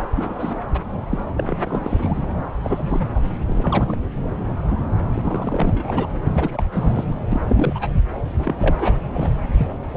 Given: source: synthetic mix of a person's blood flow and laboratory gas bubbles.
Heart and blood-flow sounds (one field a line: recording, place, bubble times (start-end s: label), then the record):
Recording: Doppler ultrasound of blood flow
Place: subclavian vein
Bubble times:
0.00-0.09 s: bubbles
0.16-0.59 s: bubbles
0.73-0.80 s: bubbles
1.09-1.24 s: bubbles
1.36-2.25 s: bubbles
2.63-3.07 s: bubbles
3.14-3.21 s: bubbles
3.46-3.96 s: bubbles
5.12-6.08 s: bubbles
6.34-6.62 s: bubbles
6.71-7.04 s: bubbles
7.32-7.41 s: bubbles
7.48-7.88 s: bubbles
8.38-8.76 s: bubbles
8.79-8.97 s: bubbles
9.12-9.31 s: bubbles
9.58-9.73 s: bubbles
9.90-9.97 s: bubbles
From the record:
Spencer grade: 3 (all of the cardiac periods contain showers or single bubble signals, but not dominating or overriding the cardiac motion signals)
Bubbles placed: anywhere in the cardiac cycle